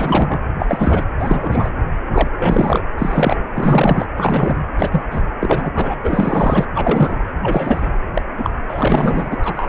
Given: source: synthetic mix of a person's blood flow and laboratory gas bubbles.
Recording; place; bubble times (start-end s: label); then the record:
Doppler ultrasound of blood flow; precordium
0.00-0.40 s: bubbles
0.58-0.66 s: bubbles
0.69-1.03 s: bubbles
1.19-1.70 s: bubbles
2.10-2.31 s: bubbles
2.37-2.81 s: bubbles
2.98-3.36 s: bubbles
3.54-4.06 s: bubbles
4.17-4.57 s: bubbles
4.78-5.04 s: bubbles
5.11-5.22 s: bubbles
5.40-5.71 s: bubbles
5.76-5.96 s: bubbles
6.04-6.66 s: bubbles
6.75-7.16 s: bubbles
7.43-7.89 s: bubbles
8.13-8.22 s: bubbles
8.37-8.50 s: bubbles
8.70-9.69 s: bubbles
From the record:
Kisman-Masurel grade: 243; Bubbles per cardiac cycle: several, 3 to 8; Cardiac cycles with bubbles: 100%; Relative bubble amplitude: loud (0.450 to 0.775); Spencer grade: 3 (all of the cardiac periods contain showers or single bubble signals, but not dominating or overriding the cardiac motion signals); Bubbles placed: anywhere in the cardiac cycle